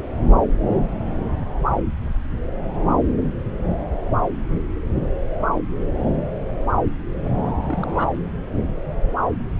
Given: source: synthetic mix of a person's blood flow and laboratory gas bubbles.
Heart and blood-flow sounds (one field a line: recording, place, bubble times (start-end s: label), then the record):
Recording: Doppler ultrasound of blood flow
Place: subclavian vein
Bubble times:
7.46-7.50 s: bubbles
7.61-8.14 s: bubbles
From the record:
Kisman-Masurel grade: 211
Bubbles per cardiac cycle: several, 3 to 8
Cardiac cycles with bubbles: 1 to 10%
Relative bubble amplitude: barely perceptible (0.100 to 0.250)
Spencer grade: 1 (occasional bubble signal discernible with the cardiac motion signal, with majority of cardiac periods free of bubbles)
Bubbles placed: anywhere in the cardiac cycle